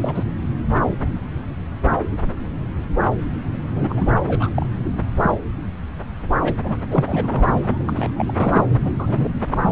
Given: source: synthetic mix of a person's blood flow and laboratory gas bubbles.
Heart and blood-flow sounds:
Doppler ultrasound of blood flow; subclavian vein
0.01-0.24 s: bubbles
3.76-4.16 s: bubbles
4.28-4.50 s: bubbles
4.54-4.66 s: bubbles
5.16-5.31 s: bubbles
6.42-6.54 s: bubbles
6.63-6.77 s: bubbles
6.90-8.11 s: bubbles
8.16-8.64 s: bubbles
8.85-8.92 s: bubbles
8.99-9.29 s: bubbles
9.34-9.38 s: bubbles
9.46-9.57 s: bubbles
9.64-9.72 s: bubbles
From the record:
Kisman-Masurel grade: 332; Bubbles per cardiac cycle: rolling drumbeat, 9 or more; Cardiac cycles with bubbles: 50 to 99%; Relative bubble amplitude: moderate (0.250 to 0.450); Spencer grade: 3 (all of the cardiac periods contain showers or single bubble signals, but not dominating or overriding the cardiac motion signals); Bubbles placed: anywhere in the cardiac cycle

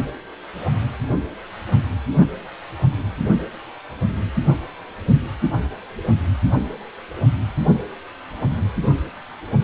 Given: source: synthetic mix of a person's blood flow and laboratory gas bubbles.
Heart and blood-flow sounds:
Doppler ultrasound of blood flow; precordium
2.17-2.29 s: bubbles
From the record:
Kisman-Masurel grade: 113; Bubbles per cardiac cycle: 1 to 2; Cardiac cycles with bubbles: 1 to 10%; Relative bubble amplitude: loud (0.450 to 0.775); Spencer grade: 1 (occasional bubble signal discernible with the cardiac motion signal, with majority of cardiac periods free of bubbles); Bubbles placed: anywhere in the cardiac cycle

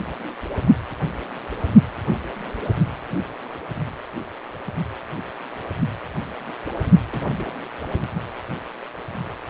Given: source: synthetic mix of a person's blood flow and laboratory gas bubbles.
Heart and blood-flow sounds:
Doppler ultrasound of blood flow; precordium
7.06-7.54 s: bubbles
From the record:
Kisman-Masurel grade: 111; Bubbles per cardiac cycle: 1 to 2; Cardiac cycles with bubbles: 1 to 10%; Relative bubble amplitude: barely perceptible (0.100 to 0.250); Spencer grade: 1 (occasional bubble signal discernible with the cardiac motion signal, with majority of cardiac periods free of bubbles); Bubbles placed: only in the low amplitude regions of the cardiac cycle

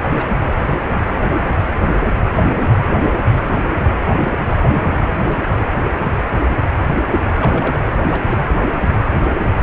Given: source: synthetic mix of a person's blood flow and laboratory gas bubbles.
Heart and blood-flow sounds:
Doppler ultrasound of blood flow; precordium
0.00-0.03 s: bubbles
0.15-0.37 s: bubbles
4.06-4.14 s: bubbles
4.17-4.52 s: bubbles
4.67-5.02 s: bubbles
7.39-7.85 s: bubbles
7.89-8.22 s: bubbles
8.29-8.38 s: bubbles
8.47-8.69 s: bubbles
From the record:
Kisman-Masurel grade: 222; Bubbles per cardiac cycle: several, 3 to 8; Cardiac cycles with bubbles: 10 to 50%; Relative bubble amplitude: moderate (0.250 to 0.450); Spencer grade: 2 (many but less than half of the cardiac periods contain bubble signals, singularly or in groups); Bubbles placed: anywhere in the cardiac cycle

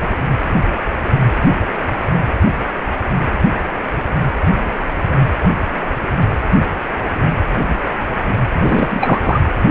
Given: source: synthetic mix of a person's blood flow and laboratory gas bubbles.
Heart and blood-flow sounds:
Doppler ultrasound of blood flow; precordium
8.53-8.87 s: bubbles
8.91-9.41 s: bubbles
From the record:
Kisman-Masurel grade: 223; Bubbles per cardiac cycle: several, 3 to 8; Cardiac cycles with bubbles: 10 to 50%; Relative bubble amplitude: loud (0.450 to 0.775); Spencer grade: 2 (many but less than half of the cardiac periods contain bubble signals, singularly or in groups); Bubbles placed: anywhere in the cardiac cycle

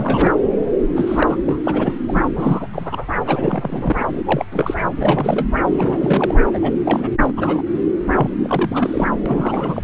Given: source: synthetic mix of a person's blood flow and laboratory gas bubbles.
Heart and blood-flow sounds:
Doppler ultrasound of blood flow; subclavian vein
0.00-0.32 s: bubbles
0.95-1.36 s: bubbles
1.46-1.60 s: bubbles
1.64-1.94 s: bubbles
2.08-2.28 s: bubbles
2.35-2.67 s: bubbles
2.73-3.06 s: bubbles
3.27-4.06 s: bubbles
4.08-4.21 s: bubbles
4.25-4.45 s: bubbles
4.51-4.74 s: bubbles
5.00-5.46 s: bubbles
5.76-6.34 s: bubbles
6.53-6.73 s: bubbles
6.84-7.09 s: bubbles
7.21-7.33 s: bubbles
7.37-7.62 s: bubbles
8.15-8.30 s: bubbles
8.43-9.09 s: bubbles
9.26-9.82 s: bubbles
From the record:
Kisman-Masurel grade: 342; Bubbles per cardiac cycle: rolling drumbeat, 9 or more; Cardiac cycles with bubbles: 100%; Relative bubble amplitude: moderate (0.250 to 0.450); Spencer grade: 3 (all of the cardiac periods contain showers or single bubble signals, but not dominating or overriding the cardiac motion signals); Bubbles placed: anywhere in the cardiac cycle

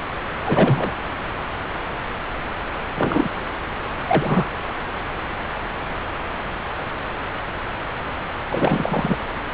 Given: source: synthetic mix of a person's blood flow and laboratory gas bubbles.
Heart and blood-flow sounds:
Doppler ultrasound of blood flow; subclavian vein
0.45-0.92 s: bubbles
2.98-3.29 s: bubbles
4.07-4.49 s: bubbles
8.50-9.18 s: bubbles
From the record:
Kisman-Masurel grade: 223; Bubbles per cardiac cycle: several, 3 to 8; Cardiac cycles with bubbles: 10 to 50%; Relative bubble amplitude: loud (0.450 to 0.775); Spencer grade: 2 (many but less than half of the cardiac periods contain bubble signals, singularly or in groups); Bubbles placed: anywhere in the cardiac cycle

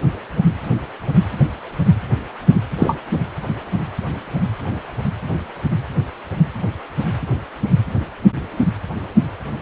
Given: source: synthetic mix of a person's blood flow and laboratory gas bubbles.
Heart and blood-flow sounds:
Doppler ultrasound of blood flow; precordium
2.79-2.99 s: bubbles
From the record:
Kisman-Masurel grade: 113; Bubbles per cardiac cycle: 1 to 2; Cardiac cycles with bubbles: 1 to 10%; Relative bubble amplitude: loud (0.450 to 0.775); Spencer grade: 1 (occasional bubble signal discernible with the cardiac motion signal, with majority of cardiac periods free of bubbles); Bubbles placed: anywhere in the cardiac cycle

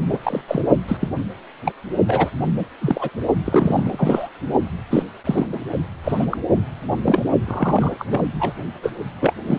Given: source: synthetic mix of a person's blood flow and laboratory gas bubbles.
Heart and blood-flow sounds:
Doppler ultrasound of blood flow; precordium
0.10-0.18 s: bubbles
0.23-0.41 s: bubbles
0.47-0.62 s: bubbles
0.87-0.97 s: bubbles
1.01-1.08 s: bubbles
1.65-1.72 s: bubbles
2.07-2.31 s: bubbles
2.58-2.66 s: bubbles
2.81-3.10 s: bubbles
3.45-4.29 s: bubbles
4.90-5.03 s: bubbles
5.24-5.59 s: bubbles
6.04-6.26 s: bubbles
6.29-6.38 s: bubbles
7.05-7.24 s: bubbles
7.46-7.96 s: bubbles
7.99-8.05 s: bubbles
8.07-8.21 s: bubbles
8.39-8.53 s: bubbles
8.82-8.91 s: bubbles
9.20-9.34 s: bubbles
9.46-9.59 s: bubbles
From the record:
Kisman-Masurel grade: 242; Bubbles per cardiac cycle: several, 3 to 8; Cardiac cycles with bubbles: 100%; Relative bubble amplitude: moderate (0.250 to 0.450); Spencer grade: 3 (all of the cardiac periods contain showers or single bubble signals, but not dominating or overriding the cardiac motion signals); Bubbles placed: only in the low amplitude regions of the cardiac cycle

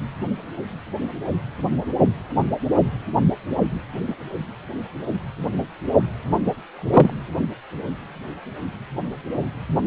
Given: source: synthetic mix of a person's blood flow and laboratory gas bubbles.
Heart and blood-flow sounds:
Doppler ultrasound of blood flow; precordium
4.07-4.15 s: bubbles
6.75-7.15 s: bubbles
From the record:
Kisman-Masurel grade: 122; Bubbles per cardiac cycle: 1 to 2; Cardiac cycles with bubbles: 10 to 50%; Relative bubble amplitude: moderate (0.250 to 0.450); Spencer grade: 2 (many but less than half of the cardiac periods contain bubble signals, singularly or in groups); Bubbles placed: only in the low amplitude regions of the cardiac cycle

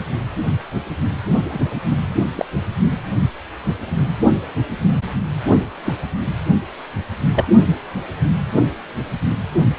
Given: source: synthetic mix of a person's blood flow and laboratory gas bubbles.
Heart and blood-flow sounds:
Doppler ultrasound of blood flow; precordium
1.49-1.59 s: bubbles
1.90-1.96 s: bubbles
2.35-2.45 s: bubbles
2.89-2.99 s: bubbles
5.84-5.94 s: bubbles
7.34-7.45 s: bubbles
From the record:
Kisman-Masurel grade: 122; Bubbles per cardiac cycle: 1 to 2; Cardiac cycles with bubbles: 10 to 50%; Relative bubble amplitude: moderate (0.250 to 0.450); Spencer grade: 2 (many but less than half of the cardiac periods contain bubble signals, singularly or in groups); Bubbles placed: only in the low amplitude regions of the cardiac cycle

